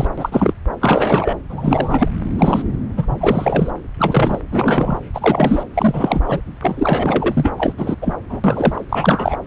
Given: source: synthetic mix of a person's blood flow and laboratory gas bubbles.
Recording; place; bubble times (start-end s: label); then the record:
Doppler ultrasound of blood flow; subclavian vein
0.00-0.07 s: bubbles
0.18-0.54 s: bubbles
0.81-1.37 s: bubbles
1.49-2.08 s: bubbles
2.38-2.63 s: bubbles
2.97-3.06 s: bubbles
3.08-3.72 s: bubbles
3.98-4.42 s: bubbles
4.52-5.00 s: bubbles
5.14-5.63 s: bubbles
5.74-6.21 s: bubbles
6.26-6.41 s: bubbles
6.61-7.54 s: bubbles
7.57-7.74 s: bubbles
7.78-7.96 s: bubbles
8.02-8.17 s: bubbles
8.29-8.40 s: bubbles
8.44-8.85 s: bubbles
8.89-9.37 s: bubbles
From the record:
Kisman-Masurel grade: 343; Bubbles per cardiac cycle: rolling drumbeat, 9 or more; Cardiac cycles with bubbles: 100%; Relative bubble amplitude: loud (0.450 to 0.775); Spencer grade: 3 (all of the cardiac periods contain showers or single bubble signals, but not dominating or overriding the cardiac motion signals); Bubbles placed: anywhere in the cardiac cycle